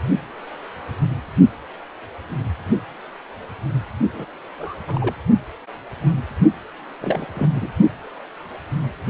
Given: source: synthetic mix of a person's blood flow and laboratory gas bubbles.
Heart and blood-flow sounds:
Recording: Doppler ultrasound of blood flow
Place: precordium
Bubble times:
4.13-4.25 s: bubbles
4.58-4.75 s: bubbles
4.88-5.14 s: bubbles
7.01-7.25 s: bubbles
7.34-7.47 s: bubbles
7.55-7.70 s: bubbles
From the record:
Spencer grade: 2 (many but less than half of the cardiac periods contain bubble signals, singularly or in groups)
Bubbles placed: only in the low amplitude regions of the cardiac cycle

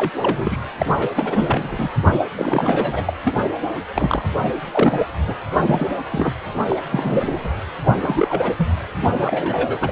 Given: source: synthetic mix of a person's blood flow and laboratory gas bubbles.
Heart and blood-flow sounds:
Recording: Doppler ultrasound of blood flow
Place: precordium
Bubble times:
0.00-0.11 s: bubbles
0.22-0.58 s: bubbles
0.79-1.09 s: bubbles
1.16-1.68 s: bubbles
1.71-1.90 s: bubbles
2.12-2.20 s: bubbles
2.36-3.17 s: bubbles
3.25-3.38 s: bubbles
3.96-4.25 s: bubbles
4.71-5.06 s: bubbles
5.27-5.35 s: bubbles
5.69-5.96 s: bubbles
6.11-6.33 s: bubbles
6.70-6.81 s: bubbles
6.92-7.52 s: bubbles
7.85-7.92 s: bubbles
8.02-8.52 s: bubbles
8.58-8.68 s: bubbles
9.02-9.78 s: bubbles
9.81-9.92 s: bubbles
From the record:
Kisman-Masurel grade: 332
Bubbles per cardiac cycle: rolling drumbeat, 9 or more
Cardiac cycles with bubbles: 50 to 99%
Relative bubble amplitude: moderate (0.250 to 0.450)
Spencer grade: 3 (all of the cardiac periods contain showers or single bubble signals, but not dominating or overriding the cardiac motion signals)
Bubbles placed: anywhere in the cardiac cycle

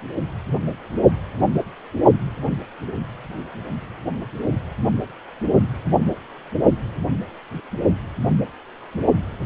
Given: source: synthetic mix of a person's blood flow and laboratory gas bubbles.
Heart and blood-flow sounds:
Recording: Doppler ultrasound of blood flow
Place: precordium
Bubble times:
no bubbles
From the record:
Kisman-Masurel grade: 000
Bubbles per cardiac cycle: 0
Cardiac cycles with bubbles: 0%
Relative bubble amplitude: no bubbles discernible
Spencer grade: 0 (complete lack of bubble signals)

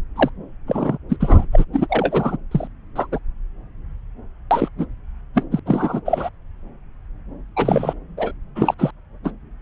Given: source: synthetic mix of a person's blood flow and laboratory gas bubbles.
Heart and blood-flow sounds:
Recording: Doppler ultrasound of blood flow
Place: subclavian vein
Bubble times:
0.15-0.29 s: bubbles
0.67-0.97 s: bubbles
1.09-1.17 s: bubbles
1.20-1.46 s: bubbles
1.52-1.65 s: bubbles
1.73-2.37 s: bubbles
2.51-2.68 s: bubbles
2.96-3.07 s: bubbles
3.12-3.19 s: bubbles
4.50-4.69 s: bubbles
4.78-4.87 s: bubbles
5.35-5.44 s: bubbles
5.51-5.60 s: bubbles
5.66-6.00 s: bubbles
6.05-6.29 s: bubbles
7.56-7.94 s: bubbles
8.17-8.31 s: bubbles
8.55-8.74 s: bubbles
8.78-8.91 s: bubbles
9.24-9.31 s: bubbles
From the record:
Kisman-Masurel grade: 233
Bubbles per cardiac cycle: several, 3 to 8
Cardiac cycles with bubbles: 50 to 99%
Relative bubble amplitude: loud (0.450 to 0.775)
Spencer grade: 3 (all of the cardiac periods contain showers or single bubble signals, but not dominating or overriding the cardiac motion signals)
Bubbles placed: anywhere in the cardiac cycle

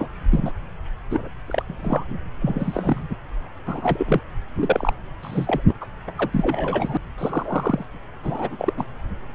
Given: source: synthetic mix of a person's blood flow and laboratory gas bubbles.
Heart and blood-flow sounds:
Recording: Doppler ultrasound of blood flow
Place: subclavian vein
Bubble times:
0.00-0.08 s: bubbles
0.31-0.51 s: bubbles
1.10-1.28 s: bubbles
1.46-1.63 s: bubbles
1.67-2.19 s: bubbles
2.42-3.07 s: bubbles
3.10-3.16 s: bubbles
3.66-4.21 s: bubbles
4.55-4.93 s: bubbles
5.21-5.62 s: bubbles
5.67-5.74 s: bubbles
5.81-5.86 s: bubbles
6.07-6.12 s: bubbles
6.16-6.29 s: bubbles
6.33-6.98 s: bubbles
7.17-7.85 s: bubbles
8.23-8.73 s: bubbles
8.76-8.85 s: bubbles
From the record:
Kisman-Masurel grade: 242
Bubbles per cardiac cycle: several, 3 to 8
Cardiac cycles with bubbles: 100%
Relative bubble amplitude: moderate (0.250 to 0.450)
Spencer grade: 3 (all of the cardiac periods contain showers or single bubble signals, but not dominating or overriding the cardiac motion signals)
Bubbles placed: anywhere in the cardiac cycle

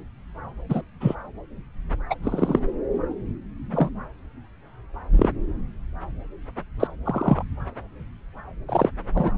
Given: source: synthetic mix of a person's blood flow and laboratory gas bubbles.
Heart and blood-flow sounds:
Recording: Doppler ultrasound of blood flow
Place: subclavian vein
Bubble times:
0.69-0.81 s: bubbles
1.00-1.15 s: bubbles
2.10-2.15 s: bubbles
2.23-2.59 s: bubbles
3.71-3.89 s: bubbles
5.17-5.31 s: bubbles
6.79-6.88 s: bubbles
7.05-7.43 s: bubbles
8.69-8.90 s: bubbles
9.15-9.33 s: bubbles
From the record:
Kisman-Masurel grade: 122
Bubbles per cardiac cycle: 1 to 2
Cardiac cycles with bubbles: 10 to 50%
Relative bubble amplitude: moderate (0.250 to 0.450)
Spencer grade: 2 (many but less than half of the cardiac periods contain bubble signals, singularly or in groups)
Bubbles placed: anywhere in the cardiac cycle

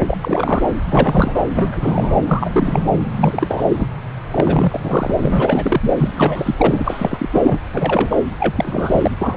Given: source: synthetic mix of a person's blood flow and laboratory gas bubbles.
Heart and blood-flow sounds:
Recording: Doppler ultrasound of blood flow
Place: subclavian vein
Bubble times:
0.00-0.02 s: bubbles
0.06-0.17 s: bubbles
0.22-0.67 s: bubbles
0.91-1.45 s: bubbles
1.55-2.21 s: bubbles
2.26-2.84 s: bubbles
3.16-3.66 s: bubbles
3.68-3.88 s: bubbles
4.30-5.12 s: bubbles
5.17-5.92 s: bubbles
5.97-6.55 s: bubbles
6.58-6.82 s: bubbles
6.84-7.29 s: bubbles
7.34-7.58 s: bubbles
7.68-8.23 s: bubbles
8.40-9.11 s: bubbles
9.21-9.37 s: bubbles
From the record:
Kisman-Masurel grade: 343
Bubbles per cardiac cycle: rolling drumbeat, 9 or more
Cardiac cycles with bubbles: 100%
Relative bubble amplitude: loud (0.450 to 0.775)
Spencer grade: 3 (all of the cardiac periods contain showers or single bubble signals, but not dominating or overriding the cardiac motion signals)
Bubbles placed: anywhere in the cardiac cycle

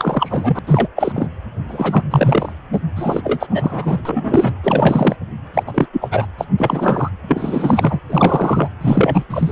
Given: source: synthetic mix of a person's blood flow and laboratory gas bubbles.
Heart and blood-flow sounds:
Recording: Doppler ultrasound of blood flow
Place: precordium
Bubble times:
0.00-0.59 s: bubbles
0.67-0.88 s: bubbles
0.96-1.28 s: bubbles
1.68-2.06 s: bubbles
2.10-2.52 s: bubbles
2.72-2.81 s: bubbles
2.96-3.46 s: bubbles
3.50-3.99 s: bubbles
4.05-4.57 s: bubbles
4.63-5.16 s: bubbles
5.54-5.63 s: bubbles
5.67-5.87 s: bubbles
5.92-6.26 s: bubbles
6.38-6.46 s: bubbles
6.58-7.10 s: bubbles
7.28-8.00 s: bubbles
8.09-8.70 s: bubbles
8.81-9.24 s: bubbles
9.30-9.52 s: bubbles
From the record:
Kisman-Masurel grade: 343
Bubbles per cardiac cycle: rolling drumbeat, 9 or more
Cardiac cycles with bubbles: 100%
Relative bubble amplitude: loud (0.450 to 0.775)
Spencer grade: 3 (all of the cardiac periods contain showers or single bubble signals, but not dominating or overriding the cardiac motion signals)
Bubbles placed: anywhere in the cardiac cycle

